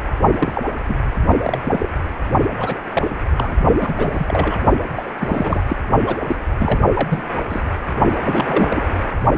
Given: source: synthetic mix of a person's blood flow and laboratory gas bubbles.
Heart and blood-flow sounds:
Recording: Doppler ultrasound of blood flow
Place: precordium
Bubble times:
0.39-0.63 s: bubbles
0.87-0.95 s: bubbles
1.42-1.59 s: bubbles
1.63-1.89 s: bubbles
2.57-2.79 s: bubbles
2.93-3.15 s: bubbles
3.37-3.55 s: bubbles
3.81-4.58 s: bubbles
4.92-5.10 s: bubbles
5.19-5.63 s: bubbles
5.69-5.76 s: bubbles
6.04-6.17 s: bubbles
6.27-6.36 s: bubbles
6.60-6.81 s: bubbles
6.94-7.22 s: bubbles
7.50-7.64 s: bubbles
8.22-8.83 s: bubbles
From the record:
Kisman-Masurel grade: 242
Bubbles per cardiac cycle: several, 3 to 8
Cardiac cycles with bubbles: 100%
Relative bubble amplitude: moderate (0.250 to 0.450)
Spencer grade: 3 (all of the cardiac periods contain showers or single bubble signals, but not dominating or overriding the cardiac motion signals)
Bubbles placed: only in the low amplitude regions of the cardiac cycle

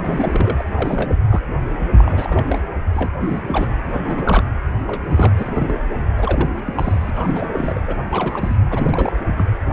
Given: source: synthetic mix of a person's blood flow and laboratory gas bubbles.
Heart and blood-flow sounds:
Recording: Doppler ultrasound of blood flow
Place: precordium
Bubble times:
0.00-0.64 s: bubbles
0.75-1.17 s: bubbles
1.29-1.42 s: bubbles
1.76-1.87 s: bubbles
1.97-2.45 s: bubbles
2.48-2.59 s: bubbles
2.94-3.10 s: bubbles
3.21-3.42 s: bubbles
3.48-3.68 s: bubbles
3.93-4.43 s: bubbles
4.87-5.02 s: bubbles
5.05-5.74 s: bubbles
6.17-6.60 s: bubbles
6.63-7.10 s: bubbles
7.14-7.82 s: bubbles
7.87-7.95 s: bubbles
8.11-8.57 s: bubbles
8.70-9.12 s: bubbles
9.37-9.46 s: bubbles
From the record:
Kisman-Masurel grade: 342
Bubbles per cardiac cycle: rolling drumbeat, 9 or more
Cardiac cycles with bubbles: 100%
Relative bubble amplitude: moderate (0.250 to 0.450)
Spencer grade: 3 (all of the cardiac periods contain showers or single bubble signals, but not dominating or overriding the cardiac motion signals)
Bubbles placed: anywhere in the cardiac cycle

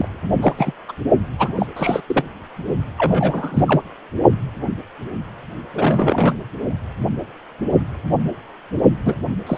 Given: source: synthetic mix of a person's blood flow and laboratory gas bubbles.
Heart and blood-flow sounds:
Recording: Doppler ultrasound of blood flow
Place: precordium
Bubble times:
0.00-0.09 s: bubbles
0.42-0.54 s: bubbles
0.57-0.72 s: bubbles
0.88-0.92 s: bubbles
1.38-1.66 s: bubbles
1.76-2.01 s: bubbles
2.07-2.23 s: bubbles
2.98-3.63 s: bubbles
3.67-3.81 s: bubbles
5.74-6.33 s: bubbles
9.05-9.15 s: bubbles
9.47-9.58 s: bubbles
From the record:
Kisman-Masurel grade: 232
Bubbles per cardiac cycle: several, 3 to 8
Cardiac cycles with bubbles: 50 to 99%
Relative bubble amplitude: moderate (0.250 to 0.450)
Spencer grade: 3 (all of the cardiac periods contain showers or single bubble signals, but not dominating or overriding the cardiac motion signals)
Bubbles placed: only in the low amplitude regions of the cardiac cycle

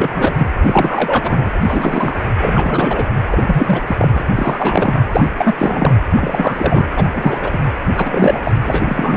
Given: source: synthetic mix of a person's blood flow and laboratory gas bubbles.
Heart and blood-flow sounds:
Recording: Doppler ultrasound of blood flow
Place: precordium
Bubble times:
0.00-0.48 s: bubbles
0.66-1.50 s: bubbles
1.62-2.17 s: bubbles
2.40-3.06 s: bubbles
3.27-3.82 s: bubbles
3.86-3.96 s: bubbles
3.98-4.09 s: bubbles
4.14-4.24 s: bubbles
4.36-5.02 s: bubbles
5.12-5.28 s: bubbles
5.38-5.54 s: bubbles
5.57-5.98 s: bubbles
6.15-6.88 s: bubbles
6.96-7.12 s: bubbles
7.15-7.58 s: bubbles
7.92-8.40 s: bubbles
8.44-8.51 s: bubbles
8.67-9.17 s: bubbles
From the record:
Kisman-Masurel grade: 333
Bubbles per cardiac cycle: rolling drumbeat, 9 or more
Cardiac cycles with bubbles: 50 to 99%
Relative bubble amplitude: loud (0.450 to 0.775)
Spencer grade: 3 (all of the cardiac periods contain showers or single bubble signals, but not dominating or overriding the cardiac motion signals)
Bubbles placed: anywhere in the cardiac cycle

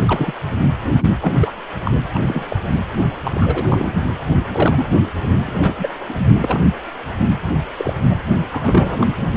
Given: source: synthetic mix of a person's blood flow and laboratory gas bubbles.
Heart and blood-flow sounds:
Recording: Doppler ultrasound of blood flow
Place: precordium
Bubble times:
0.07-0.33 s: bubbles
1.00-1.14 s: bubbles
1.22-1.32 s: bubbles
1.41-1.51 s: bubbles
1.84-1.98 s: bubbles
2.13-2.46 s: bubbles
2.49-2.57 s: bubbles
2.71-2.79 s: bubbles
3.24-3.32 s: bubbles
3.34-3.92 s: bubbles
4.51-4.86 s: bubbles
5.46-5.75 s: bubbles
5.79-5.88 s: bubbles
6.08-6.13 s: bubbles
6.17-6.33 s: bubbles
6.42-6.67 s: bubbles
7.77-7.93 s: bubbles
8.10-8.16 s: bubbles
8.51-9.07 s: bubbles
9.17-9.30 s: bubbles
From the record:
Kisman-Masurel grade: 242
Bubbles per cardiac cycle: several, 3 to 8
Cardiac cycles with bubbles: 100%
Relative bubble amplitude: moderate (0.250 to 0.450)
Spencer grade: 3 (all of the cardiac periods contain showers or single bubble signals, but not dominating or overriding the cardiac motion signals)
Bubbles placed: anywhere in the cardiac cycle

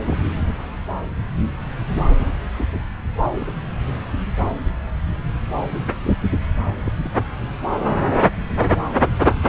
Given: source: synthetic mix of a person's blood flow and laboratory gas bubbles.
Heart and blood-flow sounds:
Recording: Doppler ultrasound of blood flow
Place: subclavian vein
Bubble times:
0.07-0.18 s: bubbles
0.47-0.54 s: bubbles
3.40-3.51 s: bubbles
6.84-6.93 s: bubbles
7.02-7.11 s: bubbles
From the record:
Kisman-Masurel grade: 121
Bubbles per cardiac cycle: 1 to 2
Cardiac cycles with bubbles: 10 to 50%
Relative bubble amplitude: barely perceptible (0.100 to 0.250)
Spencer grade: 2 (many but less than half of the cardiac periods contain bubble signals, singularly or in groups)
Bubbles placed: anywhere in the cardiac cycle

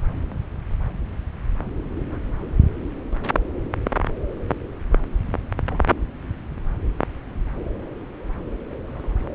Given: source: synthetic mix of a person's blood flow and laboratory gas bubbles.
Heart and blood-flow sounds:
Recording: Doppler ultrasound of blood flow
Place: subclavian vein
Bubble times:
2.11-2.18 s: bubbles
5.69-5.81 s: bubbles
8.88-9.16 s: bubbles
9.20-9.25 s: bubbles
From the record:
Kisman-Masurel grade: 121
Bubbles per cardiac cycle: 1 to 2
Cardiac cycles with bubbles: 10 to 50%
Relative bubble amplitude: barely perceptible (0.100 to 0.250)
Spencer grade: 2 (many but less than half of the cardiac periods contain bubble signals, singularly or in groups)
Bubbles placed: anywhere in the cardiac cycle

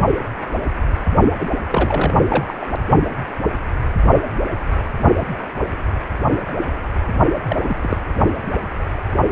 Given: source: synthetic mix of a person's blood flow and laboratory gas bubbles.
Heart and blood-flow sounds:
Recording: Doppler ultrasound of blood flow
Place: precordium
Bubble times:
1.40-1.46 s: bubbles
1.72-2.27 s: bubbles
2.29-2.66 s: bubbles
7.49-7.97 s: bubbles
From the record:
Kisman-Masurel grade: 222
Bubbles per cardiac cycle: several, 3 to 8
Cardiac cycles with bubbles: 10 to 50%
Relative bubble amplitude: moderate (0.250 to 0.450)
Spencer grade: 2 (many but less than half of the cardiac periods contain bubble signals, singularly or in groups)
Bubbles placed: only in the low amplitude regions of the cardiac cycle

